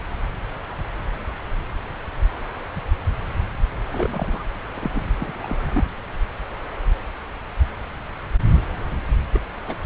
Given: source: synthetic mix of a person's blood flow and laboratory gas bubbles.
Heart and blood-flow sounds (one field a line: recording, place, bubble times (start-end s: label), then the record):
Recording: Doppler ultrasound of blood flow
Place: subclavian vein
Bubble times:
3.85-4.43 s: bubbles
4.74-4.91 s: bubbles
4.93-5.12 s: bubbles
5.20-5.87 s: bubbles
9.33-9.40 s: bubbles
9.68-9.76 s: bubbles
From the record:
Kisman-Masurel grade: 221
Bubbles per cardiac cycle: several, 3 to 8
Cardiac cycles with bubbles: 10 to 50%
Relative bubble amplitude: barely perceptible (0.100 to 0.250)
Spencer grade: 2 (many but less than half of the cardiac periods contain bubble signals, singularly or in groups)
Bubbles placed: anywhere in the cardiac cycle